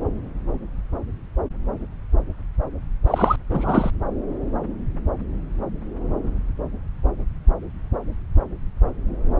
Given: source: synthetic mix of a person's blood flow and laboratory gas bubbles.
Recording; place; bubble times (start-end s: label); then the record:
Doppler ultrasound of blood flow; subclavian vein
3.06-3.36 s: bubbles
3.50-3.90 s: bubbles
From the record:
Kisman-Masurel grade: 213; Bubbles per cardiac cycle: several, 3 to 8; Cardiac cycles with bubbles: 1 to 10%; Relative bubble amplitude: loud (0.450 to 0.775); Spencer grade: 1 (occasional bubble signal discernible with the cardiac motion signal, with majority of cardiac periods free of bubbles); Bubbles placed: anywhere in the cardiac cycle